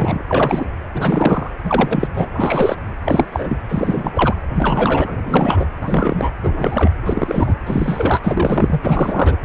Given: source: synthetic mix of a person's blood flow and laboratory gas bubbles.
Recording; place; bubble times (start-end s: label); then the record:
Doppler ultrasound of blood flow; precordium
0.00-0.22 s: bubbles
0.27-0.66 s: bubbles
0.94-1.50 s: bubbles
1.64-2.08 s: bubbles
2.14-2.31 s: bubbles
2.35-2.76 s: bubbles
3.04-3.58 s: bubbles
3.69-4.34 s: bubbles
4.54-5.17 s: bubbles
5.25-5.66 s: bubbles
5.81-6.32 s: bubbles
6.42-6.90 s: bubbles
7.06-7.54 s: bubbles
7.66-9.36 s: bubbles
9.43-9.45 s: bubbles
From the record:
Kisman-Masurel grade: 343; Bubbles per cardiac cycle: rolling drumbeat, 9 or more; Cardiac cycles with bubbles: 100%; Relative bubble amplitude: loud (0.450 to 0.775); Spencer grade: 3 (all of the cardiac periods contain showers or single bubble signals, but not dominating or overriding the cardiac motion signals); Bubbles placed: anywhere in the cardiac cycle